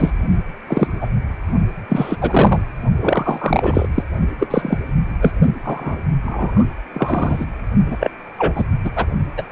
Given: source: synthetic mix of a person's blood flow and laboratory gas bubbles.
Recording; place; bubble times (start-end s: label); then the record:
Doppler ultrasound of blood flow; precordium
0.00-0.13 s: bubbles
0.67-0.88 s: bubbles
1.01-1.07 s: bubbles
1.89-2.17 s: bubbles
2.21-2.61 s: bubbles
3.00-3.87 s: bubbles
3.94-4.03 s: bubbles
4.39-4.47 s: bubbles
4.50-4.78 s: bubbles
5.21-5.31 s: bubbles
5.64-5.96 s: bubbles
6.24-6.66 s: bubbles
6.94-7.46 s: bubbles
7.87-7.97 s: bubbles
8.00-8.11 s: bubbles
8.38-8.65 s: bubbles
8.84-8.90 s: bubbles
8.96-9.06 s: bubbles
9.37-9.42 s: bubbles
From the record:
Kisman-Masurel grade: 243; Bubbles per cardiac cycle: several, 3 to 8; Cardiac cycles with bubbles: 100%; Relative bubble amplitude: loud (0.450 to 0.775); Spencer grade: 3 (all of the cardiac periods contain showers or single bubble signals, but not dominating or overriding the cardiac motion signals); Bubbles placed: only in the low amplitude regions of the cardiac cycle